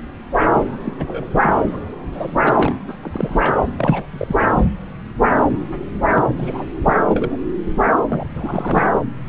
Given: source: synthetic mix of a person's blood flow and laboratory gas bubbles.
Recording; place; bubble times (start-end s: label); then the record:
Doppler ultrasound of blood flow; subclavian vein
0.37-0.47 s: bubbles
0.54-0.77 s: bubbles
0.84-0.97 s: bubbles
1.00-1.05 s: bubbles
1.07-1.26 s: bubbles
1.41-1.77 s: bubbles
2.11-2.36 s: bubbles
2.44-2.76 s: bubbles
2.87-2.98 s: bubbles
3.03-3.57 s: bubbles
3.77-4.06 s: bubbles
4.18-4.36 s: bubbles
4.48-4.65 s: bubbles
6.10-6.33 s: bubbles
6.37-6.65 s: bubbles
6.85-6.97 s: bubbles
7.08-7.37 s: bubbles
8.09-8.25 s: bubbles
8.36-8.83 s: bubbles
From the record:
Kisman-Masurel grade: 232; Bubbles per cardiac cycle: several, 3 to 8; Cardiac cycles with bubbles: 50 to 99%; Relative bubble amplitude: moderate (0.250 to 0.450); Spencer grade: 3 (all of the cardiac periods contain showers or single bubble signals, but not dominating or overriding the cardiac motion signals); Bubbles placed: anywhere in the cardiac cycle